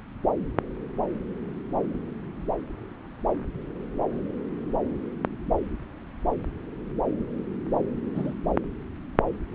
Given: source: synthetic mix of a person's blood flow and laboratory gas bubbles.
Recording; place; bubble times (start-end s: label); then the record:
Doppler ultrasound of blood flow; subclavian vein
8.15-8.34 s: bubbles
From the record:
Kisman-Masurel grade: 111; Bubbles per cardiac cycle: 1 to 2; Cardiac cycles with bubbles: 1 to 10%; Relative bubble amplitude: barely perceptible (0.100 to 0.250); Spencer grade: 1 (occasional bubble signal discernible with the cardiac motion signal, with majority of cardiac periods free of bubbles); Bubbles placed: anywhere in the cardiac cycle